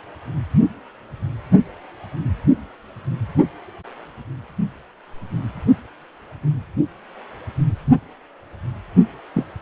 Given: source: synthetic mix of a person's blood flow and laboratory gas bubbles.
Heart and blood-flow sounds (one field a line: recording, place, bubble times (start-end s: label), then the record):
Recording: Doppler ultrasound of blood flow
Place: precordium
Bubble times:
9.34-9.45 s: bubbles
From the record:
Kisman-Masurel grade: 112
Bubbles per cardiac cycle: 1 to 2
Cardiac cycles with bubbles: 1 to 10%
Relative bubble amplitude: moderate (0.250 to 0.450)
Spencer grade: 1 (occasional bubble signal discernible with the cardiac motion signal, with majority of cardiac periods free of bubbles)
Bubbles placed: anywhere in the cardiac cycle